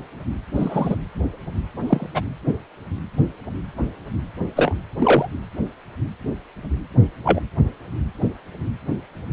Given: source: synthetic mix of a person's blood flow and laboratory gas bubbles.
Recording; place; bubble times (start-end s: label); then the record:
Doppler ultrasound of blood flow; precordium
0.55-0.96 s: bubbles
1.87-2.06 s: bubbles
2.15-2.22 s: bubbles
4.56-4.74 s: bubbles
4.98-5.29 s: bubbles
7.25-7.40 s: bubbles
From the record:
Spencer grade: 2 (many but less than half of the cardiac periods contain bubble signals, singularly or in groups); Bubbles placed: anywhere in the cardiac cycle